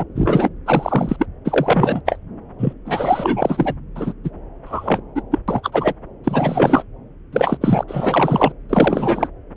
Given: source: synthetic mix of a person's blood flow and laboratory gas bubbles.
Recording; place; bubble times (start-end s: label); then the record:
Doppler ultrasound of blood flow; subclavian vein
0.00-0.04 s: bubbles
0.15-0.49 s: bubbles
0.66-1.17 s: bubbles
1.19-1.26 s: bubbles
1.45-2.00 s: bubbles
2.06-2.16 s: bubbles
2.58-2.73 s: bubbles
2.85-3.74 s: bubbles
3.95-4.12 s: bubbles
4.23-4.30 s: bubbles
4.65-5.00 s: bubbles
5.14-5.21 s: bubbles
5.31-5.39 s: bubbles
5.47-5.93 s: bubbles
6.23-6.83 s: bubbles
7.32-7.57 s: bubbles
7.61-7.83 s: bubbles
7.87-8.52 s: bubbles
8.69-9.28 s: bubbles
From the record:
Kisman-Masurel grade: 343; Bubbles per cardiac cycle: rolling drumbeat, 9 or more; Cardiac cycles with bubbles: 100%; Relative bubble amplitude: loud (0.450 to 0.775); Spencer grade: 3 (all of the cardiac periods contain showers or single bubble signals, but not dominating or overriding the cardiac motion signals); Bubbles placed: anywhere in the cardiac cycle